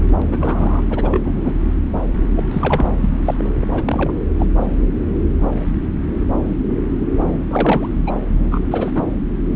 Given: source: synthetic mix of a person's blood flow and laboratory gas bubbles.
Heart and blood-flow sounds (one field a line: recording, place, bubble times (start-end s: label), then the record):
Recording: Doppler ultrasound of blood flow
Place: subclavian vein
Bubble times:
0.22-0.83 s: bubbles
0.90-1.20 s: bubbles
1.25-1.53 s: bubbles
2.36-2.43 s: bubbles
2.51-2.90 s: bubbles
3.02-3.10 s: bubbles
3.25-3.35 s: bubbles
3.38-3.52 s: bubbles
3.60-3.67 s: bubbles
3.73-4.12 s: bubbles
4.38-4.46 s: bubbles
7.47-7.87 s: bubbles
8.07-8.15 s: bubbles
8.51-8.60 s: bubbles
8.71-8.92 s: bubbles
8.95-9.03 s: bubbles
From the record:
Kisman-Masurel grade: 233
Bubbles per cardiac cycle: several, 3 to 8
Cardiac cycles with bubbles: 50 to 99%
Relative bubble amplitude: loud (0.450 to 0.775)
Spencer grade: 3 (all of the cardiac periods contain showers or single bubble signals, but not dominating or overriding the cardiac motion signals)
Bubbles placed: anywhere in the cardiac cycle